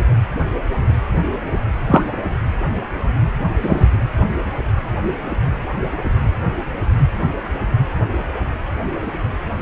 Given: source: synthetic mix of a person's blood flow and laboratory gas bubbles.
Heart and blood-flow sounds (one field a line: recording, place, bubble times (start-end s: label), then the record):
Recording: Doppler ultrasound of blood flow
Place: precordium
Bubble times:
1.86-2.04 s: bubbles
3.62-3.86 s: bubbles
From the record:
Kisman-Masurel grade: 123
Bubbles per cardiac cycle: 1 to 2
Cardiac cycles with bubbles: 10 to 50%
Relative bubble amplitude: loud (0.450 to 0.775)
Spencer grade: 2 (many but less than half of the cardiac periods contain bubble signals, singularly or in groups)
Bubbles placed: anywhere in the cardiac cycle